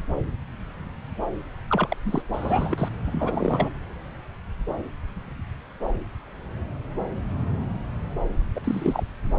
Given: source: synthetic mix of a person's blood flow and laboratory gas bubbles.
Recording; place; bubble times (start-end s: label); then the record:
Doppler ultrasound of blood flow; subclavian vein
1.70-1.96 s: bubbles
2.05-2.22 s: bubbles
2.33-2.88 s: bubbles
3.06-3.71 s: bubbles
8.55-8.61 s: bubbles
8.64-9.04 s: bubbles
From the record:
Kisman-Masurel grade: 221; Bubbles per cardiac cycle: several, 3 to 8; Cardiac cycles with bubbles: 10 to 50%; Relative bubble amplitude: barely perceptible (0.100 to 0.250); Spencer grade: 2 (many but less than half of the cardiac periods contain bubble signals, singularly or in groups); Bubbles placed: anywhere in the cardiac cycle